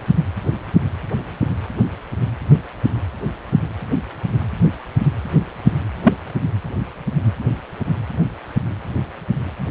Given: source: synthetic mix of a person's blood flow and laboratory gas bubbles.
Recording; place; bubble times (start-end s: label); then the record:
Doppler ultrasound of blood flow; precordium
6.04-6.13 s: bubbles
From the record:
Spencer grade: 1 (occasional bubble signal discernible with the cardiac motion signal, with majority of cardiac periods free of bubbles); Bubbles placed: anywhere in the cardiac cycle